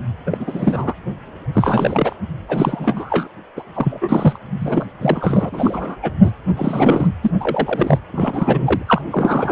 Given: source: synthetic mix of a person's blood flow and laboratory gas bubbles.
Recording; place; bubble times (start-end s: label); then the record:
Doppler ultrasound of blood flow; precordium
0.26-0.38 s: bubbles
0.40-0.93 s: bubbles
1.53-2.16 s: bubbles
2.48-3.28 s: bubbles
3.56-3.62 s: bubbles
3.75-3.99 s: bubbles
4.01-4.38 s: bubbles
4.60-4.85 s: bubbles
5.01-5.96 s: bubbles
6.02-6.10 s: bubbles
6.24-6.31 s: bubbles
6.47-7.08 s: bubbles
7.22-7.31 s: bubbles
7.40-7.98 s: bubbles
8.12-8.84 s: bubbles
8.87-9.02 s: bubbles
9.11-9.52 s: bubbles
From the record:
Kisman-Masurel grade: 343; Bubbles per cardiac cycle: rolling drumbeat, 9 or more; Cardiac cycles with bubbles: 100%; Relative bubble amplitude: loud (0.450 to 0.775); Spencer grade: 3 (all of the cardiac periods contain showers or single bubble signals, but not dominating or overriding the cardiac motion signals); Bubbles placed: anywhere in the cardiac cycle